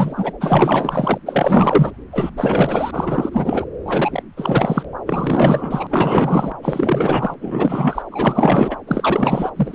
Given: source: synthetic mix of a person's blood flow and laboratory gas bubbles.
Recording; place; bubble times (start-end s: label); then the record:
Doppler ultrasound of blood flow; subclavian vein
0.00-0.32 s: bubbles
0.41-1.18 s: bubbles
1.25-1.91 s: bubbles
2.12-2.31 s: bubbles
2.37-3.29 s: bubbles
3.32-3.65 s: bubbles
3.85-4.23 s: bubbles
4.37-4.83 s: bubbles
5.06-6.54 s: bubbles
6.62-7.34 s: bubbles
7.41-8.02 s: bubbles
8.11-8.77 s: bubbles
8.87-9.51 s: bubbles
9.56-9.75 s: bubbles
From the record:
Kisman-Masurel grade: 444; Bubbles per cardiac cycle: continuous sound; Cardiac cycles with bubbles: 100%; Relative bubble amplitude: maximal (0.775 to 0.999); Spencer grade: 4 (maximum detectable bubble signal sounding continuously throughout systole and diastole of every cardiac period, and overriding the amplitude of the normal cardiac signals); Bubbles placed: anywhere in the cardiac cycle